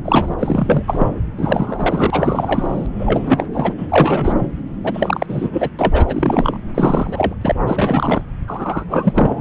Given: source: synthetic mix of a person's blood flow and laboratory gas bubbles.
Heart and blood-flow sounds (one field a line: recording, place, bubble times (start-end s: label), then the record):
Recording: Doppler ultrasound of blood flow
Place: subclavian vein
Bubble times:
0.04-0.34 s: bubbles
0.39-0.82 s: bubbles
0.87-1.09 s: bubbles
1.37-2.86 s: bubbles
2.99-3.47 s: bubbles
3.53-3.74 s: bubbles
3.77-4.47 s: bubbles
4.83-5.71 s: bubbles
5.79-6.57 s: bubbles
6.74-7.34 s: bubbles
7.41-7.52 s: bubbles
7.67-8.21 s: bubbles
8.47-8.85 s: bubbles
8.88-9.41 s: bubbles
From the record:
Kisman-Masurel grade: 333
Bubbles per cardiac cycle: rolling drumbeat, 9 or more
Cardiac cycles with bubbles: 50 to 99%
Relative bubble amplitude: loud (0.450 to 0.775)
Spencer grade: 3 (all of the cardiac periods contain showers or single bubble signals, but not dominating or overriding the cardiac motion signals)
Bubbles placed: anywhere in the cardiac cycle